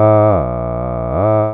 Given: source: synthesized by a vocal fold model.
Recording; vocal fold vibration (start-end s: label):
sustained vowel that changes in the middle
0.00-0.27 s: 107.7 Hz, open quotient 0.66
0.47-1.07 s: 60.1 Hz, open quotient 0.36
1.27-1.54 s: 107.7 Hz, open quotient 0.66